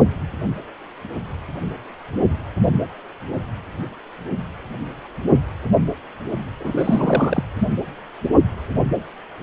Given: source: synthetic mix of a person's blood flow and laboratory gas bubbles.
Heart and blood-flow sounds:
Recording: Doppler ultrasound of blood flow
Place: precordium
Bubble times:
6.59-7.43 s: bubbles
From the record:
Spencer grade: 1 (occasional bubble signal discernible with the cardiac motion signal, with majority of cardiac periods free of bubbles)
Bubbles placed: anywhere in the cardiac cycle

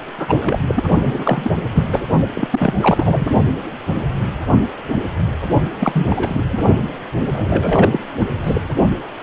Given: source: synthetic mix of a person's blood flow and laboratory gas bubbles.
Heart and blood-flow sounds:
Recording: Doppler ultrasound of blood flow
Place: precordium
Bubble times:
0.00-0.04 s: bubbles
0.18-0.58 s: bubbles
0.67-0.83 s: bubbles
1.04-1.51 s: bubbles
1.73-2.02 s: bubbles
2.35-2.48 s: bubbles
2.52-2.73 s: bubbles
2.80-3.25 s: bubbles
5.80-6.07 s: bubbles
6.09-6.45 s: bubbles
6.49-6.58 s: bubbles
7.26-7.99 s: bubbles
8.19-8.26 s: bubbles
8.44-8.62 s: bubbles
From the record:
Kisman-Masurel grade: 333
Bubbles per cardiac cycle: rolling drumbeat, 9 or more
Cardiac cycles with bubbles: 50 to 99%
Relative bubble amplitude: loud (0.450 to 0.775)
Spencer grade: 3 (all of the cardiac periods contain showers or single bubble signals, but not dominating or overriding the cardiac motion signals)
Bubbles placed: only in the low amplitude regions of the cardiac cycle

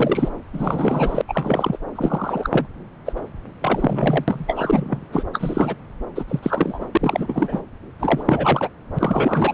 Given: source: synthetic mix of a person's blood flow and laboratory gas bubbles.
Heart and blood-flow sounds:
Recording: Doppler ultrasound of blood flow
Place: subclavian vein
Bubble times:
0.00-0.30 s: bubbles
0.53-1.21 s: bubbles
1.28-1.77 s: bubbles
1.95-2.67 s: bubbles
3.05-3.12 s: bubbles
3.15-3.21 s: bubbles
3.61-4.25 s: bubbles
4.28-5.04 s: bubbles
5.12-5.24 s: bubbles
5.33-5.75 s: bubbles
6.15-6.25 s: bubbles
6.28-6.40 s: bubbles
6.43-6.86 s: bubbles
6.92-7.61 s: bubbles
8.00-8.70 s: bubbles
8.95-9.54 s: bubbles
From the record:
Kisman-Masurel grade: 343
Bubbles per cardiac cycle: rolling drumbeat, 9 or more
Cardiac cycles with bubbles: 100%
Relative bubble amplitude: loud (0.450 to 0.775)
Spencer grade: 3 (all of the cardiac periods contain showers or single bubble signals, but not dominating or overriding the cardiac motion signals)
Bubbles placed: anywhere in the cardiac cycle

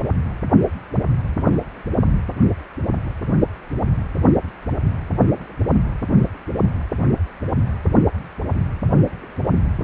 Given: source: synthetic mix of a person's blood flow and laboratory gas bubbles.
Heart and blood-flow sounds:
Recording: Doppler ultrasound of blood flow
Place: precordium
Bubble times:
no bubbles
From the record:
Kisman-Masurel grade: 000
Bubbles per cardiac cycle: 0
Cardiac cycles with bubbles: 0%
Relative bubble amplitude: no bubbles discernible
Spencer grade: 0 (complete lack of bubble signals)

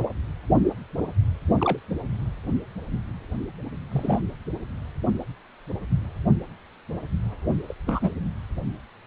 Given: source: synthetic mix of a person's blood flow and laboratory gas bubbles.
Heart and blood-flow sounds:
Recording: Doppler ultrasound of blood flow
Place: precordium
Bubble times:
1.58-1.79 s: bubbles
3.92-4.19 s: bubbles
7.69-7.73 s: bubbles
7.86-8.11 s: bubbles
From the record:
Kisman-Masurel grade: 121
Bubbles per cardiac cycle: 1 to 2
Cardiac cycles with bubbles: 10 to 50%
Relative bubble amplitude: barely perceptible (0.100 to 0.250)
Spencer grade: 2 (many but less than half of the cardiac periods contain bubble signals, singularly or in groups)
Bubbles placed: anywhere in the cardiac cycle

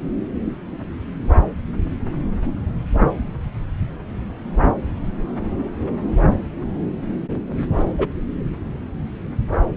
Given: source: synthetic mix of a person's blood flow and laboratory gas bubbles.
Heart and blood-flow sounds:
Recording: Doppler ultrasound of blood flow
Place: subclavian vein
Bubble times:
7.77-7.85 s: bubbles
7.98-8.06 s: bubbles
From the record:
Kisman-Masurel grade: 112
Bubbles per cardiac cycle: 1 to 2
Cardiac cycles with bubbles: 1 to 10%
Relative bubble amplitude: moderate (0.250 to 0.450)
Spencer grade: 1 (occasional bubble signal discernible with the cardiac motion signal, with majority of cardiac periods free of bubbles)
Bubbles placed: anywhere in the cardiac cycle

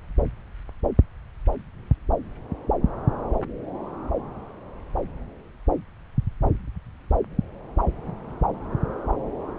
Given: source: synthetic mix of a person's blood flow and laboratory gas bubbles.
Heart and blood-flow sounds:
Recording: Doppler ultrasound of blood flow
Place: subclavian vein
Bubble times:
no bubbles
From the record:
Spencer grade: 0 (complete lack of bubble signals)

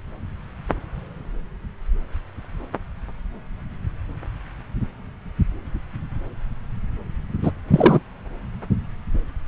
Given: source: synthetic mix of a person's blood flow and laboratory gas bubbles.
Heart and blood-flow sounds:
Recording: Doppler ultrasound of blood flow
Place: subclavian vein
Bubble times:
7.42-7.51 s: bubbles
7.71-8.00 s: bubbles
From the record:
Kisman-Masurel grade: 213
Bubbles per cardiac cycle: several, 3 to 8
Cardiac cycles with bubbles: 1 to 10%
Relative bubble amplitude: loud (0.450 to 0.775)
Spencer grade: 1 (occasional bubble signal discernible with the cardiac motion signal, with majority of cardiac periods free of bubbles)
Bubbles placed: anywhere in the cardiac cycle

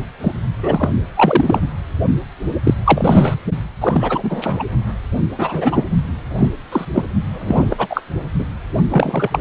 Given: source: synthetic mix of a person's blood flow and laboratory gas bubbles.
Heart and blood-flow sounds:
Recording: Doppler ultrasound of blood flow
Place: precordium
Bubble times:
0.20-0.32 s: bubbles
0.62-0.88 s: bubbles
1.16-1.60 s: bubbles
2.63-2.74 s: bubbles
2.84-3.34 s: bubbles
3.81-4.64 s: bubbles
5.38-5.85 s: bubbles
6.38-6.49 s: bubbles
6.71-6.85 s: bubbles
6.94-7.04 s: bubbles
7.33-8.02 s: bubbles
8.38-8.44 s: bubbles
8.88-9.39 s: bubbles
From the record:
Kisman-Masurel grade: 243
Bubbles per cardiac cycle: several, 3 to 8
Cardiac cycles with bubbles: 100%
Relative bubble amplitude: loud (0.450 to 0.775)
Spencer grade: 3 (all of the cardiac periods contain showers or single bubble signals, but not dominating or overriding the cardiac motion signals)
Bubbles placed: only in the low amplitude regions of the cardiac cycle

